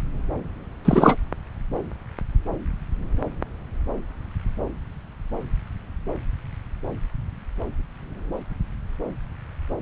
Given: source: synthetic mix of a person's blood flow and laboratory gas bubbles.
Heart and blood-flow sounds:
Doppler ultrasound of blood flow; subclavian vein
0.84-1.17 s: bubbles
From the record:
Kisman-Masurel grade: 213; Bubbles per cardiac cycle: several, 3 to 8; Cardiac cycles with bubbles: 1 to 10%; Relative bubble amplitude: loud (0.450 to 0.775); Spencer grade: 1 (occasional bubble signal discernible with the cardiac motion signal, with majority of cardiac periods free of bubbles); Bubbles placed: anywhere in the cardiac cycle

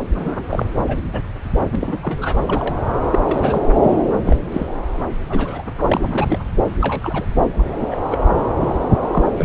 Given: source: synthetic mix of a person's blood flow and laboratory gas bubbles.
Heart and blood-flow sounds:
Doppler ultrasound of blood flow; subclavian vein
0.15-0.42 s: bubbles
0.50-0.66 s: bubbles
0.88-0.97 s: bubbles
1.12-1.21 s: bubbles
1.71-1.75 s: bubbles
1.80-1.98 s: bubbles
2.02-2.38 s: bubbles
2.45-2.88 s: bubbles
3.10-3.19 s: bubbles
3.23-3.61 s: bubbles
3.69-3.73 s: bubbles
3.82-3.97 s: bubbles
4.25-4.36 s: bubbles
4.51-4.67 s: bubbles
5.29-5.63 s: bubbles
5.87-6.40 s: bubbles
6.80-7.26 s: bubbles
7.58-7.63 s: bubbles
7.91-7.96 s: bubbles
8.11-8.18 s: bubbles
8.61-8.76 s: bubbles
9.12-9.23 s: bubbles
9.37-9.45 s: bubbles
From the record:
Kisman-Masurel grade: 242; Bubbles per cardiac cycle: several, 3 to 8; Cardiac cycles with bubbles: 100%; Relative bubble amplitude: moderate (0.250 to 0.450); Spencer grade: 3 (all of the cardiac periods contain showers or single bubble signals, but not dominating or overriding the cardiac motion signals); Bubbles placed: anywhere in the cardiac cycle

